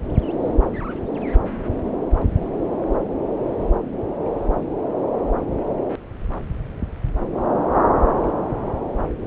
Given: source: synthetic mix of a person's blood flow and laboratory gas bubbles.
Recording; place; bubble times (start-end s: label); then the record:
Doppler ultrasound of blood flow; subclavian vein
no bubbles
From the record:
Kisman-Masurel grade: 000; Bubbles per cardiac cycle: 0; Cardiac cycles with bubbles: 0%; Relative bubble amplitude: no bubbles discernible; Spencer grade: 0 (complete lack of bubble signals)